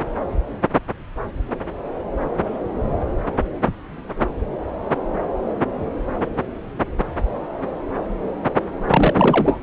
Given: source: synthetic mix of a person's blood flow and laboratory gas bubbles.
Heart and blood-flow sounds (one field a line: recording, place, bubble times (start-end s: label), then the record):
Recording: Doppler ultrasound of blood flow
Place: subclavian vein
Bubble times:
8.88-9.61 s: bubbles
From the record:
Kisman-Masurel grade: 213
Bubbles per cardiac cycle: several, 3 to 8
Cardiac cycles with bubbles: 1 to 10%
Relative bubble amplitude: loud (0.450 to 0.775)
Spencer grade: 1 (occasional bubble signal discernible with the cardiac motion signal, with majority of cardiac periods free of bubbles)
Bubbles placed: anywhere in the cardiac cycle